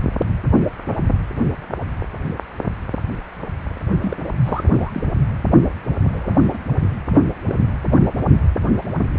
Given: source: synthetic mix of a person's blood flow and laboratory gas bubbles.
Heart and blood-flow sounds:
Doppler ultrasound of blood flow; precordium
4.00-4.17 s: bubbles
4.44-4.64 s: bubbles
4.67-5.07 s: bubbles
6.07-6.36 s: bubbles
6.40-6.58 s: bubbles
7.07-7.26 s: bubbles
7.42-7.59 s: bubbles
8.12-8.19 s: bubbles
From the record:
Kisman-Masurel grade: 221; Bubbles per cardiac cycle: several, 3 to 8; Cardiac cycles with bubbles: 10 to 50%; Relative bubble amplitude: barely perceptible (0.100 to 0.250); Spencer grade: 2 (many but less than half of the cardiac periods contain bubble signals, singularly or in groups); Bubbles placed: only in the low amplitude regions of the cardiac cycle

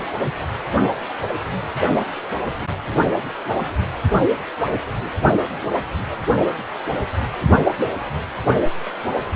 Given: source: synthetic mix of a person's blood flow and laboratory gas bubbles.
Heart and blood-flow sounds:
Doppler ultrasound of blood flow; precordium
0.00-0.04 s: bubbles
From the record:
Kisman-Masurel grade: 112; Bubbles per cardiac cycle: 1 to 2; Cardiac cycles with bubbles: 1 to 10%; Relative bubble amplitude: moderate (0.250 to 0.450); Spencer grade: 1 (occasional bubble signal discernible with the cardiac motion signal, with majority of cardiac periods free of bubbles); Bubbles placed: only in the low amplitude regions of the cardiac cycle

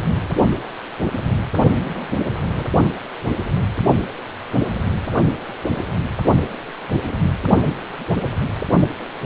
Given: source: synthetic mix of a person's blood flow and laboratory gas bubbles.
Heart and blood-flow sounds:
Doppler ultrasound of blood flow; precordium
1.83-2.65 s: bubbles
From the record:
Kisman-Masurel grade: 211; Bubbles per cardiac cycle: several, 3 to 8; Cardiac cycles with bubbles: 1 to 10%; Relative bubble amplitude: barely perceptible (0.100 to 0.250); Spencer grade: 1 (occasional bubble signal discernible with the cardiac motion signal, with majority of cardiac periods free of bubbles); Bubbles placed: only in the low amplitude regions of the cardiac cycle

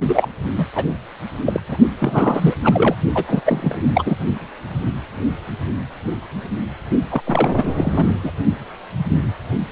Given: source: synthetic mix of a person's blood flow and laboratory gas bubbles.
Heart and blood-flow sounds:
Doppler ultrasound of blood flow; precordium
0.08-0.28 s: bubbles
0.58-0.66 s: bubbles
0.75-0.84 s: bubbles
1.45-1.60 s: bubbles
1.68-1.77 s: bubbles
2.00-2.54 s: bubbles
2.63-2.95 s: bubbles
3.15-3.41 s: bubbles
3.45-3.76 s: bubbles
3.94-4.17 s: bubbles
7.10-7.22 s: bubbles
7.26-7.52 s: bubbles
7.57-7.72 s: bubbles
7.75-8.16 s: bubbles
8.23-8.31 s: bubbles
From the record:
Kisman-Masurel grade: 333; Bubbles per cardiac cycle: rolling drumbeat, 9 or more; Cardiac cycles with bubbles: 50 to 99%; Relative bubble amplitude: loud (0.450 to 0.775); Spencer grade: 3 (all of the cardiac periods contain showers or single bubble signals, but not dominating or overriding the cardiac motion signals); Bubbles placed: only in the low amplitude regions of the cardiac cycle

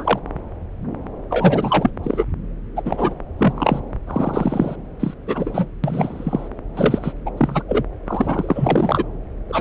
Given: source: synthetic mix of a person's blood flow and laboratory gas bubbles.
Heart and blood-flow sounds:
Doppler ultrasound of blood flow; subclavian vein
0.00-0.19 s: bubbles
1.30-1.90 s: bubbles
2.03-2.25 s: bubbles
2.76-2.82 s: bubbles
2.85-3.15 s: bubbles
3.38-3.80 s: bubbles
4.07-4.76 s: bubbles
5.00-5.14 s: bubbles
5.27-5.66 s: bubbles
5.83-6.48 s: bubbles
6.75-7.12 s: bubbles
7.26-7.32 s: bubbles
7.37-7.62 s: bubbles
7.68-7.83 s: bubbles
8.06-9.04 s: bubbles
9.49-9.61 s: bubbles
From the record:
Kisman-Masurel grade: 332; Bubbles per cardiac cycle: rolling drumbeat, 9 or more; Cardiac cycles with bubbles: 50 to 99%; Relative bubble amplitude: moderate (0.250 to 0.450); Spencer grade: 3 (all of the cardiac periods contain showers or single bubble signals, but not dominating or overriding the cardiac motion signals); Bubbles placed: anywhere in the cardiac cycle

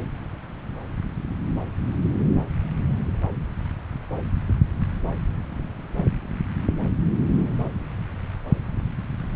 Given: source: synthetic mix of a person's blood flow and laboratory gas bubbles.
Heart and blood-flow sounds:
Doppler ultrasound of blood flow; subclavian vein
no bubbles
From the record:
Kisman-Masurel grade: 000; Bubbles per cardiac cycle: 0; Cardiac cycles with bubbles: 0%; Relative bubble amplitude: no bubbles discernible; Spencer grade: 0 (complete lack of bubble signals)

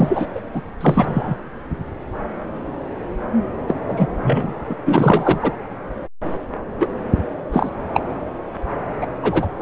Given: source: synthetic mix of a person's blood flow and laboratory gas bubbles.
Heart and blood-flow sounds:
Doppler ultrasound of blood flow; subclavian vein
0.00-0.26 s: bubbles
0.35-0.41 s: bubbles
0.53-0.62 s: bubbles
0.81-1.35 s: bubbles
3.67-3.75 s: bubbles
3.88-4.07 s: bubbles
4.22-4.53 s: bubbles
4.68-4.76 s: bubbles
4.86-5.39 s: bubbles
5.42-5.52 s: bubbles
6.79-6.88 s: bubbles
7.53-7.69 s: bubbles
7.93-8.01 s: bubbles
9.01-9.06 s: bubbles
9.22-9.47 s: bubbles
From the record:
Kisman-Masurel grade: 233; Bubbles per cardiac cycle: several, 3 to 8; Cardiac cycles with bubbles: 50 to 99%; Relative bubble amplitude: loud (0.450 to 0.775); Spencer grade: 3 (all of the cardiac periods contain showers or single bubble signals, but not dominating or overriding the cardiac motion signals); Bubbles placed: anywhere in the cardiac cycle

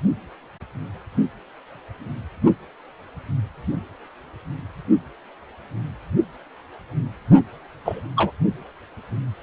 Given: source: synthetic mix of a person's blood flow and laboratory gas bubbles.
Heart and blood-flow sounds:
Doppler ultrasound of blood flow; precordium
7.84-8.00 s: bubbles
8.16-8.31 s: bubbles
From the record:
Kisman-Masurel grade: 122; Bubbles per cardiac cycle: 1 to 2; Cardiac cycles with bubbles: 10 to 50%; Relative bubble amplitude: moderate (0.250 to 0.450); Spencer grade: 2 (many but less than half of the cardiac periods contain bubble signals, singularly or in groups); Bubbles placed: only in the low amplitude regions of the cardiac cycle

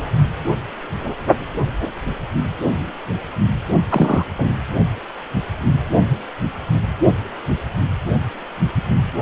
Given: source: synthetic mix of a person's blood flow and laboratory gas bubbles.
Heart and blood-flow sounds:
Doppler ultrasound of blood flow; precordium
3.89-4.25 s: bubbles
4.38-4.55 s: bubbles
From the record:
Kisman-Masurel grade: 213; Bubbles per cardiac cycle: several, 3 to 8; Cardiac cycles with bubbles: 1 to 10%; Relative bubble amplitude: loud (0.450 to 0.775); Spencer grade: 1 (occasional bubble signal discernible with the cardiac motion signal, with majority of cardiac periods free of bubbles); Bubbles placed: only in the low amplitude regions of the cardiac cycle

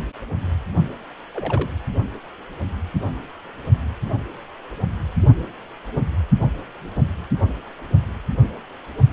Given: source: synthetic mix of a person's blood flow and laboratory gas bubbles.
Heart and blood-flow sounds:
Doppler ultrasound of blood flow; precordium
1.33-1.70 s: bubbles
From the record:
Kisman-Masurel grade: 112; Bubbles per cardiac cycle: 1 to 2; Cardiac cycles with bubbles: 1 to 10%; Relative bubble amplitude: moderate (0.250 to 0.450); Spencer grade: 1 (occasional bubble signal discernible with the cardiac motion signal, with majority of cardiac periods free of bubbles); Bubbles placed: only in the low amplitude regions of the cardiac cycle

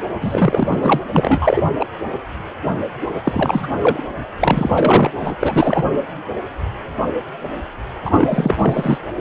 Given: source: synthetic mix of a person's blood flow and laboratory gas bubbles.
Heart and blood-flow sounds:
Doppler ultrasound of blood flow; precordium
0.21-0.99 s: bubbles
1.12-1.63 s: bubbles
1.79-1.86 s: bubbles
3.15-3.21 s: bubbles
3.23-3.68 s: bubbles
3.73-4.04 s: bubbles
4.41-5.10 s: bubbles
5.21-5.35 s: bubbles
5.40-5.85 s: bubbles
8.04-8.56 s: bubbles
8.59-8.98 s: bubbles
From the record:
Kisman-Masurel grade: 333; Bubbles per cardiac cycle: rolling drumbeat, 9 or more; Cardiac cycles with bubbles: 50 to 99%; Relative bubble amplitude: loud (0.450 to 0.775); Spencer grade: 3 (all of the cardiac periods contain showers or single bubble signals, but not dominating or overriding the cardiac motion signals); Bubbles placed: anywhere in the cardiac cycle

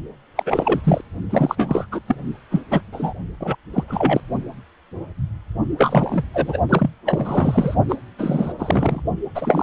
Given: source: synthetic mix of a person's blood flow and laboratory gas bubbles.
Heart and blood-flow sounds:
Doppler ultrasound of blood flow; precordium
0.36-0.43 s: bubbles
0.46-0.81 s: bubbles
0.83-1.01 s: bubbles
1.29-1.86 s: bubbles
1.92-2.00 s: bubbles
2.07-2.16 s: bubbles
2.50-2.61 s: bubbles
2.70-2.83 s: bubbles
2.92-3.13 s: bubbles
3.40-3.56 s: bubbles
3.73-3.83 s: bubbles
3.87-4.21 s: bubbles
5.78-6.25 s: bubbles
6.33-6.59 s: bubbles
6.69-6.91 s: bubbles
7.05-7.75 s: bubbles
7.89-7.96 s: bubbles
8.18-8.54 s: bubbles
8.59-9.00 s: bubbles
9.34-9.63 s: bubbles
From the record:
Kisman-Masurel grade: 333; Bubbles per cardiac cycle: rolling drumbeat, 9 or more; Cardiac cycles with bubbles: 50 to 99%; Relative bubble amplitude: loud (0.450 to 0.775); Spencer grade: 3 (all of the cardiac periods contain showers or single bubble signals, but not dominating or overriding the cardiac motion signals); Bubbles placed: only in the low amplitude regions of the cardiac cycle

